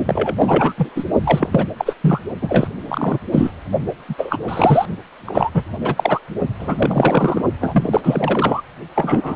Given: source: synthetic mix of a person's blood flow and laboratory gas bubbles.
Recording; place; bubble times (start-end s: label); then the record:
Doppler ultrasound of blood flow; precordium
0.05-0.74 s: bubbles
0.76-0.90 s: bubbles
0.95-1.04 s: bubbles
1.24-1.49 s: bubbles
1.52-1.64 s: bubbles
1.78-1.93 s: bubbles
2.01-2.21 s: bubbles
2.41-2.67 s: bubbles
2.88-3.18 s: bubbles
3.32-3.51 s: bubbles
4.08-4.14 s: bubbles
4.17-4.38 s: bubbles
4.47-4.85 s: bubbles
5.25-5.50 s: bubbles
5.54-5.63 s: bubbles
5.80-6.19 s: bubbles
6.59-7.42 s: bubbles
7.61-8.62 s: bubbles
8.95-9.36 s: bubbles
From the record:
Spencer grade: 3 (all of the cardiac periods contain showers or single bubble signals, but not dominating or overriding the cardiac motion signals); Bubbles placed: only in the low amplitude regions of the cardiac cycle